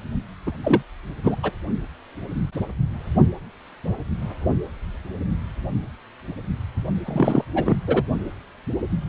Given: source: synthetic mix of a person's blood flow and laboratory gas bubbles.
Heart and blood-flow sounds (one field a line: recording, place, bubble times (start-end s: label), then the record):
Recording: Doppler ultrasound of blood flow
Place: precordium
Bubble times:
0.46-0.52 s: bubbles
0.63-0.82 s: bubbles
1.24-1.36 s: bubbles
1.43-1.52 s: bubbles
7.05-7.45 s: bubbles
7.55-7.75 s: bubbles
7.87-8.03 s: bubbles
From the record:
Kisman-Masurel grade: 223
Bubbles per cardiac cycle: several, 3 to 8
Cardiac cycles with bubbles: 10 to 50%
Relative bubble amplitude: loud (0.450 to 0.775)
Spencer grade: 2 (many but less than half of the cardiac periods contain bubble signals, singularly or in groups)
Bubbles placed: only in the low amplitude regions of the cardiac cycle